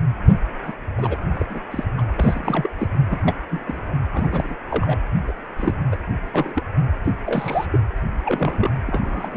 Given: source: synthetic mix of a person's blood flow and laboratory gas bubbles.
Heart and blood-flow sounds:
Doppler ultrasound of blood flow; precordium
0.67-0.72 s: bubbles
0.98-1.18 s: bubbles
1.34-1.46 s: bubbles
1.50-1.60 s: bubbles
1.71-1.84 s: bubbles
1.98-2.06 s: bubbles
2.16-2.70 s: bubbles
2.77-2.87 s: bubbles
3.10-3.20 s: bubbles
3.25-3.36 s: bubbles
3.50-3.63 s: bubbles
3.67-3.81 s: bubbles
4.13-4.55 s: bubbles
4.70-4.98 s: bubbles
5.28-5.33 s: bubbles
5.57-5.74 s: bubbles
5.92-5.96 s: bubbles
6.33-6.63 s: bubbles
7.04-7.12 s: bubbles
7.26-7.66 s: bubbles
7.71-7.79 s: bubbles
8.25-8.71 s: bubbles
8.87-9.37 s: bubbles
From the record:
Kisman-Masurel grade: 242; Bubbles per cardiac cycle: several, 3 to 8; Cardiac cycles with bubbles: 100%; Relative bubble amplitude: moderate (0.250 to 0.450); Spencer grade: 3 (all of the cardiac periods contain showers or single bubble signals, but not dominating or overriding the cardiac motion signals); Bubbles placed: anywhere in the cardiac cycle

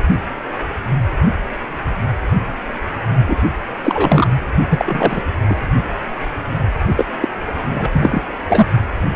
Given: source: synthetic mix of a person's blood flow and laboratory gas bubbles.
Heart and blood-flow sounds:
Doppler ultrasound of blood flow; precordium
3.28-3.35 s: bubbles
3.83-4.28 s: bubbles
4.69-5.23 s: bubbles
5.49-5.55 s: bubbles
6.97-7.04 s: bubbles
7.21-7.28 s: bubbles
7.75-7.90 s: bubbles
7.92-8.22 s: bubbles
8.48-8.66 s: bubbles
From the record:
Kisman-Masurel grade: 223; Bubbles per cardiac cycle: several, 3 to 8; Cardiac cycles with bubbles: 10 to 50%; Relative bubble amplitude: loud (0.450 to 0.775); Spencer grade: 2 (many but less than half of the cardiac periods contain bubble signals, singularly or in groups); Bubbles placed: only in the low amplitude regions of the cardiac cycle

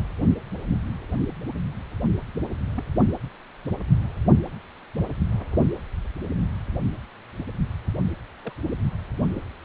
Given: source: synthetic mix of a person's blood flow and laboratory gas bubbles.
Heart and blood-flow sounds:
Doppler ultrasound of blood flow; precordium
2.75-2.84 s: bubbles
8.42-8.52 s: bubbles
From the record:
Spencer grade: 2 (many but less than half of the cardiac periods contain bubble signals, singularly or in groups); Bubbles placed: anywhere in the cardiac cycle

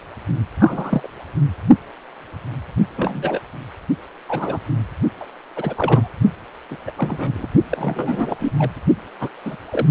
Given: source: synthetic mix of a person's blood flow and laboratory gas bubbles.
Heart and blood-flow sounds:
Doppler ultrasound of blood flow; precordium
0.60-1.10 s: bubbles
2.98-3.40 s: bubbles
4.29-4.58 s: bubbles
5.20-5.25 s: bubbles
5.55-6.13 s: bubbles
6.71-6.77 s: bubbles
6.87-6.91 s: bubbles
6.97-7.47 s: bubbles
7.70-8.36 s: bubbles
8.39-8.52 s: bubbles
8.59-8.70 s: bubbles
9.20-9.29 s: bubbles
9.45-9.57 s: bubbles
9.71-9.86 s: bubbles
From the record:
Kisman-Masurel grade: 232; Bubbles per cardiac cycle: several, 3 to 8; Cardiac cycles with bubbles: 50 to 99%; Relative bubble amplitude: moderate (0.250 to 0.450); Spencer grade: 3 (all of the cardiac periods contain showers or single bubble signals, but not dominating or overriding the cardiac motion signals); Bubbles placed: only in the low amplitude regions of the cardiac cycle

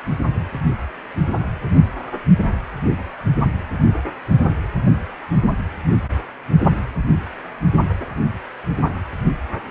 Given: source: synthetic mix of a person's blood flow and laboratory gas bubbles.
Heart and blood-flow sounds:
Doppler ultrasound of blood flow; precordium
no bubbles
From the record:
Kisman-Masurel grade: 000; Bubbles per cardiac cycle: 0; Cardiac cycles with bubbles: 0%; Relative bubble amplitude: no bubbles discernible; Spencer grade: 0 (complete lack of bubble signals)

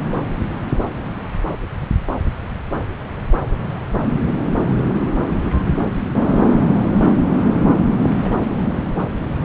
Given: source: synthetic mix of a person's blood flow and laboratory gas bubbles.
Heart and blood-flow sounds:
Doppler ultrasound of blood flow; subclavian vein
8.15-8.82 s: bubbles
From the record:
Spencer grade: 1 (occasional bubble signal discernible with the cardiac motion signal, with majority of cardiac periods free of bubbles); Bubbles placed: anywhere in the cardiac cycle

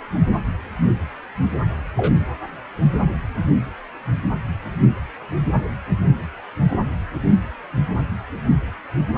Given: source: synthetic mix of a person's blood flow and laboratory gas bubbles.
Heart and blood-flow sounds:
Doppler ultrasound of blood flow; precordium
1.97-2.17 s: bubbles
From the record:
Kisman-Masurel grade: 112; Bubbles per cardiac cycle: 1 to 2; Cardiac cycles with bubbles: 1 to 10%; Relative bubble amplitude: moderate (0.250 to 0.450); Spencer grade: 1 (occasional bubble signal discernible with the cardiac motion signal, with majority of cardiac periods free of bubbles); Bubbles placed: anywhere in the cardiac cycle

